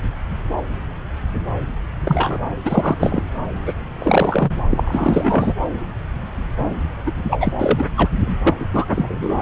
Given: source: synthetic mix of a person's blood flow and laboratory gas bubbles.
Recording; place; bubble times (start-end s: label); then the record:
Doppler ultrasound of blood flow; subclavian vein
2.04-2.40 s: bubbles
2.65-2.96 s: bubbles
2.98-3.22 s: bubbles
3.66-3.73 s: bubbles
4.00-4.52 s: bubbles
4.71-5.54 s: bubbles
7.06-7.12 s: bubbles
7.24-7.53 s: bubbles
7.58-7.88 s: bubbles
7.96-8.09 s: bubbles
8.16-8.36 s: bubbles
8.44-8.55 s: bubbles
8.60-8.65 s: bubbles
8.74-8.86 s: bubbles
8.90-9.42 s: bubbles
From the record:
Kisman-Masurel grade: 333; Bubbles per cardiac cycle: rolling drumbeat, 9 or more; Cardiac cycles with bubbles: 50 to 99%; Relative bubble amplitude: loud (0.450 to 0.775); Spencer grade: 3 (all of the cardiac periods contain showers or single bubble signals, but not dominating or overriding the cardiac motion signals); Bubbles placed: anywhere in the cardiac cycle